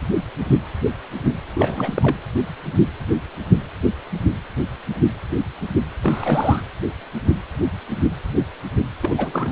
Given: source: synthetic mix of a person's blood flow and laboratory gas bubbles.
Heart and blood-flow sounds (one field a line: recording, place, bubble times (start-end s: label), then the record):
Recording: Doppler ultrasound of blood flow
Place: precordium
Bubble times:
1.55-2.17 s: bubbles
6.03-6.64 s: bubbles
9.02-9.52 s: bubbles
From the record:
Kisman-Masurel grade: 222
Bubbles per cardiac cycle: several, 3 to 8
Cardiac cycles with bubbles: 10 to 50%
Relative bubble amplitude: moderate (0.250 to 0.450)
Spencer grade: 2 (many but less than half of the cardiac periods contain bubble signals, singularly or in groups)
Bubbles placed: anywhere in the cardiac cycle